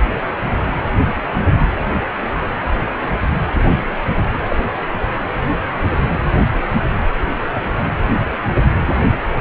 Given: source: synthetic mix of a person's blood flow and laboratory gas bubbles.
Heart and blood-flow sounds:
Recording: Doppler ultrasound of blood flow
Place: precordium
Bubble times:
4.48-4.56 s: bubbles
From the record:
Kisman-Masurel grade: 112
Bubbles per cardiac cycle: 1 to 2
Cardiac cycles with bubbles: 1 to 10%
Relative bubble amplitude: moderate (0.250 to 0.450)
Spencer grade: 1 (occasional bubble signal discernible with the cardiac motion signal, with majority of cardiac periods free of bubbles)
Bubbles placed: anywhere in the cardiac cycle

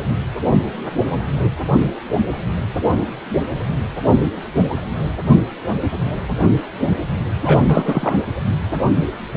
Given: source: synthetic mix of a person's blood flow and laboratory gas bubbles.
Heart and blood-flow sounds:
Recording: Doppler ultrasound of blood flow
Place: precordium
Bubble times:
7.42-8.14 s: bubbles
From the record:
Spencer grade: 1 (occasional bubble signal discernible with the cardiac motion signal, with majority of cardiac periods free of bubbles)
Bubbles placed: anywhere in the cardiac cycle

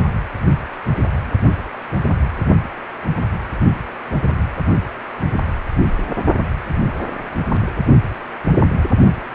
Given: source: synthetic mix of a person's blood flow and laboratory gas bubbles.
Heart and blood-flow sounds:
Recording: Doppler ultrasound of blood flow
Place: precordium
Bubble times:
9.21-9.25 s: bubbles
From the record:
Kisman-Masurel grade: 111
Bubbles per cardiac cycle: 1 to 2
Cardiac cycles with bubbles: 1 to 10%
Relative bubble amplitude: barely perceptible (0.100 to 0.250)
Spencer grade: 1 (occasional bubble signal discernible with the cardiac motion signal, with majority of cardiac periods free of bubbles)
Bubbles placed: only in the low amplitude regions of the cardiac cycle

